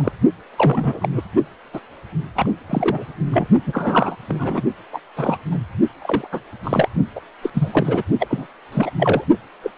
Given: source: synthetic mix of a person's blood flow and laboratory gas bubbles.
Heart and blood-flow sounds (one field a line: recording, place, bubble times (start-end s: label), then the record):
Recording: Doppler ultrasound of blood flow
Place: precordium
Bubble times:
0.00-0.12 s: bubbles
0.57-1.08 s: bubbles
1.11-1.22 s: bubbles
1.73-1.80 s: bubbles
2.35-2.51 s: bubbles
2.70-3.12 s: bubbles
3.33-3.48 s: bubbles
3.66-4.16 s: bubbles
4.28-4.62 s: bubbles
4.92-5.00 s: bubbles
5.16-5.38 s: bubbles
5.51-5.60 s: bubbles
6.01-6.27 s: bubbles
6.32-6.40 s: bubbles
6.63-6.88 s: bubbles
7.15-7.21 s: bubbles
7.42-7.50 s: bubbles
7.54-8.03 s: bubbles
8.20-8.27 s: bubbles
8.29-8.46 s: bubbles
8.72-8.90 s: bubbles
8.98-9.24 s: bubbles
9.63-9.71 s: bubbles
From the record:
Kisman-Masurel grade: 242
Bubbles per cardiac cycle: several, 3 to 8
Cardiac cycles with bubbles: 100%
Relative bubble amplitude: moderate (0.250 to 0.450)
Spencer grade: 3 (all of the cardiac periods contain showers or single bubble signals, but not dominating or overriding the cardiac motion signals)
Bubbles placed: only in the low amplitude regions of the cardiac cycle